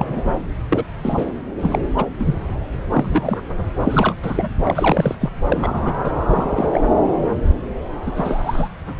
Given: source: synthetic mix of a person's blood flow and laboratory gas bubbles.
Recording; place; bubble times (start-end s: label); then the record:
Doppler ultrasound of blood flow; subclavian vein
0.00-0.40 s: bubbles
0.71-0.84 s: bubbles
1.02-1.25 s: bubbles
1.60-1.79 s: bubbles
1.96-2.06 s: bubbles
2.19-2.35 s: bubbles
2.93-3.39 s: bubbles
3.80-4.13 s: bubbles
4.22-4.49 s: bubbles
4.63-5.15 s: bubbles
5.21-5.29 s: bubbles
5.48-6.12 s: bubbles
6.28-6.81 s: bubbles
8.06-8.11 s: bubbles
8.15-8.69 s: bubbles
From the record:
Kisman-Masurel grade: 232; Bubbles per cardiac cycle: several, 3 to 8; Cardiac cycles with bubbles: 50 to 99%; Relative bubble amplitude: moderate (0.250 to 0.450); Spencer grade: 3 (all of the cardiac periods contain showers or single bubble signals, but not dominating or overriding the cardiac motion signals); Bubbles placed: anywhere in the cardiac cycle